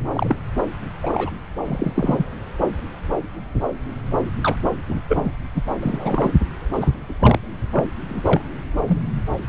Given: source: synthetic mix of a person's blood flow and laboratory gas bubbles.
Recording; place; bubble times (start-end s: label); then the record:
Doppler ultrasound of blood flow; subclavian vein
0.10-0.35 s: bubbles
0.57-0.65 s: bubbles
1.02-1.30 s: bubbles
1.65-2.25 s: bubbles
4.40-4.56 s: bubbles
4.88-5.01 s: bubbles
5.08-5.31 s: bubbles
5.55-5.62 s: bubbles
5.81-6.30 s: bubbles
6.72-6.91 s: bubbles
7.09-7.13 s: bubbles
7.19-7.38 s: bubbles
7.72-7.84 s: bubbles
8.08-8.21 s: bubbles
8.25-8.41 s: bubbles
8.88-8.98 s: bubbles
From the record:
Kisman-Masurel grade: 232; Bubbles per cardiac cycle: several, 3 to 8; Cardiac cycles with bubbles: 50 to 99%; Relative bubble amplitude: moderate (0.250 to 0.450); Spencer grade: 3 (all of the cardiac periods contain showers or single bubble signals, but not dominating or overriding the cardiac motion signals); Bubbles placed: anywhere in the cardiac cycle